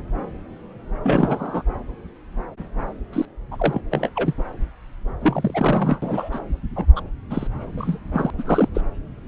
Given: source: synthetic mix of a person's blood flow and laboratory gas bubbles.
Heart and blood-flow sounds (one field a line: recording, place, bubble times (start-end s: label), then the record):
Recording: Doppler ultrasound of blood flow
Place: subclavian vein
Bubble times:
1.03-1.62 s: bubbles
3.12-3.25 s: bubbles
3.51-3.81 s: bubbles
3.90-4.09 s: bubbles
4.15-4.34 s: bubbles
5.21-6.40 s: bubbles
6.75-6.85 s: bubbles
6.96-7.02 s: bubbles
7.30-7.47 s: bubbles
7.77-7.98 s: bubbles
8.13-8.31 s: bubbles
8.38-8.69 s: bubbles
8.74-8.81 s: bubbles
From the record:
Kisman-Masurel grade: 232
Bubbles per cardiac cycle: several, 3 to 8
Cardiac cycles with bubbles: 50 to 99%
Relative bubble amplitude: moderate (0.250 to 0.450)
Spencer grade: 3 (all of the cardiac periods contain showers or single bubble signals, but not dominating or overriding the cardiac motion signals)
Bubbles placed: anywhere in the cardiac cycle